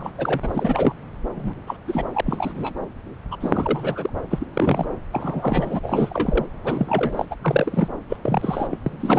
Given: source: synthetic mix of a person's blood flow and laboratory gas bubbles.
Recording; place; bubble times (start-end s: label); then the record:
Doppler ultrasound of blood flow; subclavian vein
0.00-0.12 s: bubbles
0.18-0.40 s: bubbles
0.43-0.95 s: bubbles
1.35-1.53 s: bubbles
1.67-1.76 s: bubbles
1.88-2.05 s: bubbles
2.13-2.21 s: bubbles
2.25-2.74 s: bubbles
3.31-3.37 s: bubbles
3.40-4.10 s: bubbles
4.31-4.45 s: bubbles
4.54-4.86 s: bubbles
5.12-5.79 s: bubbles
5.83-6.46 s: bubbles
6.64-7.25 s: bubbles
7.31-7.36 s: bubbles
7.44-7.89 s: bubbles
8.09-8.17 s: bubbles
8.23-8.67 s: bubbles
8.71-8.79 s: bubbles
8.86-8.92 s: bubbles
8.99-9.19 s: bubbles
From the record:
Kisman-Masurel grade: 342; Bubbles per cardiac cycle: rolling drumbeat, 9 or more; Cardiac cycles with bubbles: 100%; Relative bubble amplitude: moderate (0.250 to 0.450); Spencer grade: 3 (all of the cardiac periods contain showers or single bubble signals, but not dominating or overriding the cardiac motion signals); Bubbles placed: anywhere in the cardiac cycle